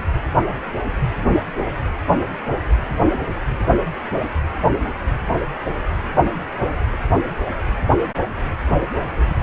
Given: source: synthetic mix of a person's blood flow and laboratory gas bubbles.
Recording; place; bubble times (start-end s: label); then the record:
Doppler ultrasound of blood flow; precordium
8.80-8.87 s: bubbles
9.15-9.35 s: bubbles
From the record:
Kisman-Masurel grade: 111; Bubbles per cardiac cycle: 1 to 2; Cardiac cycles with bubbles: 1 to 10%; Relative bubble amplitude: barely perceptible (0.100 to 0.250); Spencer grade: 1 (occasional bubble signal discernible with the cardiac motion signal, with majority of cardiac periods free of bubbles); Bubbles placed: anywhere in the cardiac cycle